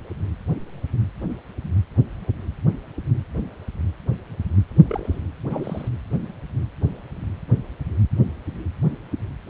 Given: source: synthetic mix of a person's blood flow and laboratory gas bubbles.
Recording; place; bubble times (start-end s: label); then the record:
Doppler ultrasound of blood flow; precordium
4.88-5.21 s: bubbles
5.50-5.88 s: bubbles
From the record:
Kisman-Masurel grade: 211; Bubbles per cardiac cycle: several, 3 to 8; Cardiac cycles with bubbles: 1 to 10%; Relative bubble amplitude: barely perceptible (0.100 to 0.250); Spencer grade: 1 (occasional bubble signal discernible with the cardiac motion signal, with majority of cardiac periods free of bubbles); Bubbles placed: anywhere in the cardiac cycle